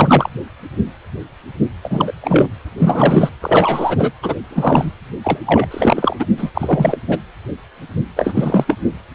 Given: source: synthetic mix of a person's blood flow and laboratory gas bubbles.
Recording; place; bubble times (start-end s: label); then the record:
Doppler ultrasound of blood flow; precordium
0.00-0.29 s: bubbles
1.83-2.13 s: bubbles
2.21-2.48 s: bubbles
2.78-3.29 s: bubbles
3.41-4.12 s: bubbles
4.22-4.34 s: bubbles
4.50-4.92 s: bubbles
5.24-5.39 s: bubbles
5.45-5.67 s: bubbles
5.71-6.17 s: bubbles
6.19-6.25 s: bubbles
6.37-6.99 s: bubbles
7.08-7.20 s: bubbles
8.16-8.65 s: bubbles
8.67-8.77 s: bubbles
From the record:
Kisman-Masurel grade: 333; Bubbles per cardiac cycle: rolling drumbeat, 9 or more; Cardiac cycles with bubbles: 50 to 99%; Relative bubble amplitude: loud (0.450 to 0.775); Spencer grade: 3 (all of the cardiac periods contain showers or single bubble signals, but not dominating or overriding the cardiac motion signals); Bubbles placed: anywhere in the cardiac cycle